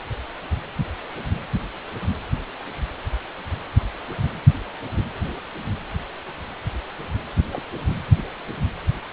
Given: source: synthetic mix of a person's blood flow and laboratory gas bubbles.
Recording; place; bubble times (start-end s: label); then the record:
Doppler ultrasound of blood flow; precordium
7.38-7.61 s: bubbles
From the record:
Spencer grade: 1 (occasional bubble signal discernible with the cardiac motion signal, with majority of cardiac periods free of bubbles); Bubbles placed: anywhere in the cardiac cycle